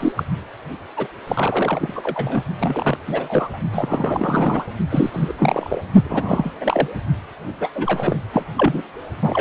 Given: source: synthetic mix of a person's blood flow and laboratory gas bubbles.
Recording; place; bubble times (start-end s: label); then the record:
Doppler ultrasound of blood flow; precordium
0.00-0.12 s: bubbles
0.16-0.24 s: bubbles
0.96-1.07 s: bubbles
1.27-2.43 s: bubbles
2.59-2.98 s: bubbles
3.07-3.58 s: bubbles
3.73-4.65 s: bubbles
4.90-5.10 s: bubbles
5.13-5.33 s: bubbles
5.39-5.85 s: bubbles
6.04-6.52 s: bubbles
6.61-6.88 s: bubbles
7.60-7.69 s: bubbles
7.75-8.18 s: bubbles
8.32-8.43 s: bubbles
8.57-8.82 s: bubbles
9.21-9.41 s: bubbles
From the record:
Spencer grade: 3 (all of the cardiac periods contain showers or single bubble signals, but not dominating or overriding the cardiac motion signals); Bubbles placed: only in the low amplitude regions of the cardiac cycle